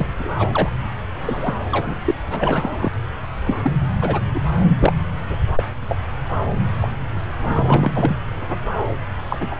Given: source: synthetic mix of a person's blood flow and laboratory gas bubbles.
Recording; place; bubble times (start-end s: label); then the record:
Doppler ultrasound of blood flow; subclavian vein
0.00-0.06 s: bubbles
0.18-0.28 s: bubbles
0.39-0.48 s: bubbles
0.52-0.71 s: bubbles
1.19-1.54 s: bubbles
1.71-1.96 s: bubbles
2.05-2.15 s: bubbles
2.28-2.92 s: bubbles
3.46-3.72 s: bubbles
4.01-4.20 s: bubbles
4.34-4.41 s: bubbles
4.70-4.92 s: bubbles
5.29-5.38 s: bubbles
5.55-5.63 s: bubbles
5.80-5.96 s: bubbles
6.80-6.91 s: bubbles
7.45-8.16 s: bubbles
9.29-9.55 s: bubbles
From the record:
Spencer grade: 3 (all of the cardiac periods contain showers or single bubble signals, but not dominating or overriding the cardiac motion signals); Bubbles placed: anywhere in the cardiac cycle